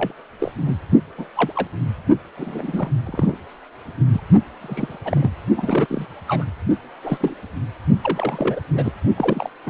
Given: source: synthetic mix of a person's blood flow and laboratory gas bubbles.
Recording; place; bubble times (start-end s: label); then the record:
Doppler ultrasound of blood flow; precordium
0.00-0.13 s: bubbles
0.39-0.52 s: bubbles
0.66-0.73 s: bubbles
1.18-1.26 s: bubbles
1.36-1.53 s: bubbles
1.55-1.67 s: bubbles
2.37-2.90 s: bubbles
3.05-3.38 s: bubbles
4.12-4.21 s: bubbles
4.61-4.99 s: bubbles
5.04-5.29 s: bubbles
5.56-6.05 s: bubbles
6.27-6.45 s: bubbles
7.04-7.35 s: bubbles
8.02-8.61 s: bubbles
8.73-8.93 s: bubbles
9.16-9.49 s: bubbles
9.66-9.70 s: bubbles
From the record:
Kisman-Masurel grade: 242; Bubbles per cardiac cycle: several, 3 to 8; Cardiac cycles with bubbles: 100%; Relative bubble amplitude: moderate (0.250 to 0.450); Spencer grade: 3 (all of the cardiac periods contain showers or single bubble signals, but not dominating or overriding the cardiac motion signals); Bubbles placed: only in the low amplitude regions of the cardiac cycle